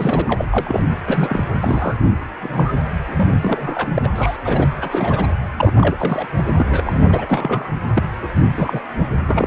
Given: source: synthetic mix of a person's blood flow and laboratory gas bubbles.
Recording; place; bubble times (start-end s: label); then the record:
Doppler ultrasound of blood flow; precordium
0.00-0.46 s: bubbles
0.51-0.83 s: bubbles
1.06-1.44 s: bubbles
1.61-1.97 s: bubbles
2.41-2.73 s: bubbles
3.05-3.90 s: bubbles
3.95-4.00 s: bubbles
4.04-4.08 s: bubbles
4.15-4.37 s: bubbles
4.44-4.70 s: bubbles
4.79-5.28 s: bubbles
5.58-5.72 s: bubbles
5.75-5.96 s: bubbles
5.99-6.27 s: bubbles
6.36-6.54 s: bubbles
6.59-7.70 s: bubbles
7.94-8.04 s: bubbles
8.22-8.28 s: bubbles
8.42-8.47 s: bubbles
8.58-8.80 s: bubbles
8.98-9.05 s: bubbles
9.28-9.47 s: bubbles
From the record:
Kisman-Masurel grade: 242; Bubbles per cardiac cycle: several, 3 to 8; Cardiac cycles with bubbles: 100%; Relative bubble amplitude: moderate (0.250 to 0.450); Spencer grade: 3 (all of the cardiac periods contain showers or single bubble signals, but not dominating or overriding the cardiac motion signals); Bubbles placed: anywhere in the cardiac cycle